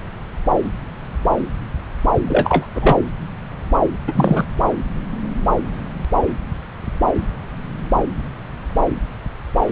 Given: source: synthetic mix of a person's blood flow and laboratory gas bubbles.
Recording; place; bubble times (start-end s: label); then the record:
Doppler ultrasound of blood flow; subclavian vein
2.27-2.67 s: bubbles
2.75-2.98 s: bubbles
4.07-4.45 s: bubbles
From the record:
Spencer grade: 2 (many but less than half of the cardiac periods contain bubble signals, singularly or in groups); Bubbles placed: anywhere in the cardiac cycle